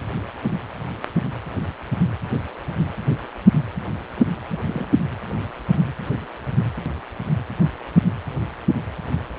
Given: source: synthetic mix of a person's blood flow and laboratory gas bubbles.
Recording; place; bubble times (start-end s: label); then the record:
Doppler ultrasound of blood flow; precordium
4.51-4.88 s: bubbles
From the record:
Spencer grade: 2 (many but less than half of the cardiac periods contain bubble signals, singularly or in groups); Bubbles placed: anywhere in the cardiac cycle